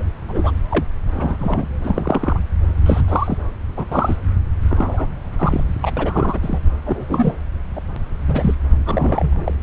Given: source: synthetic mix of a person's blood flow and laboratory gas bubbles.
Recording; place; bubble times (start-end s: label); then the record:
Doppler ultrasound of blood flow; subclavian vein
0.00-0.02 s: bubbles
0.28-0.51 s: bubbles
0.71-0.85 s: bubbles
1.12-1.67 s: bubbles
1.84-2.40 s: bubbles
2.85-3.01 s: bubbles
3.08-3.38 s: bubbles
3.76-3.85 s: bubbles
3.91-4.19 s: bubbles
4.70-5.07 s: bubbles
5.39-5.64 s: bubbles
5.82-5.91 s: bubbles
5.96-6.58 s: bubbles
6.85-7.36 s: bubbles
7.75-7.80 s: bubbles
8.28-8.55 s: bubbles
8.86-9.54 s: bubbles
From the record:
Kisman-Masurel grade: 232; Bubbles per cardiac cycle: several, 3 to 8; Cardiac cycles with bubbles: 50 to 99%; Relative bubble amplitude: moderate (0.250 to 0.450); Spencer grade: 3 (all of the cardiac periods contain showers or single bubble signals, but not dominating or overriding the cardiac motion signals); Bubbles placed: anywhere in the cardiac cycle